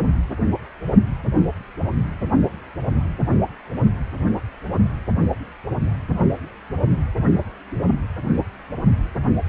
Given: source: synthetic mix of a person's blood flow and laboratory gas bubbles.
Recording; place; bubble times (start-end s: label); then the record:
Doppler ultrasound of blood flow; precordium
no bubbles
From the record:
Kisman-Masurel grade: 000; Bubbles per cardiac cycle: 0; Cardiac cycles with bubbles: 0%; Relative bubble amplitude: no bubbles discernible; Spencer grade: 0 (complete lack of bubble signals)